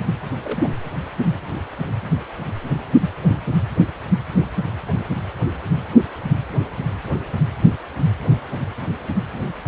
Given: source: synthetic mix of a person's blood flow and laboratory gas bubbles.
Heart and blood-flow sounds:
Doppler ultrasound of blood flow; precordium
0.44-0.70 s: bubbles
From the record:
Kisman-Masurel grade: 211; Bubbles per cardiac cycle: several, 3 to 8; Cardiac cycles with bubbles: 1 to 10%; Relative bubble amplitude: barely perceptible (0.100 to 0.250); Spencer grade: 1 (occasional bubble signal discernible with the cardiac motion signal, with majority of cardiac periods free of bubbles); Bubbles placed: anywhere in the cardiac cycle

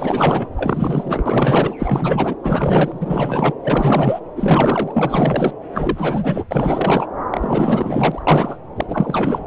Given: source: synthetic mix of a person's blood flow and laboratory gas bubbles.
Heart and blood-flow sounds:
Doppler ultrasound of blood flow; subclavian vein
0.00-0.49 s: bubbles
0.57-1.75 s: bubbles
1.78-2.35 s: bubbles
2.42-3.55 s: bubbles
3.62-4.20 s: bubbles
4.36-5.52 s: bubbles
5.74-6.45 s: bubbles
6.50-7.07 s: bubbles
7.30-8.22 s: bubbles
8.27-8.57 s: bubbles
8.76-9.45 s: bubbles
From the record:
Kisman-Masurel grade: 444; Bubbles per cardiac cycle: continuous sound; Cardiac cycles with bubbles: 100%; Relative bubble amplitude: maximal (0.775 to 0.999); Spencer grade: 4 (maximum detectable bubble signal sounding continuously throughout systole and diastole of every cardiac period, and overriding the amplitude of the normal cardiac signals); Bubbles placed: anywhere in the cardiac cycle

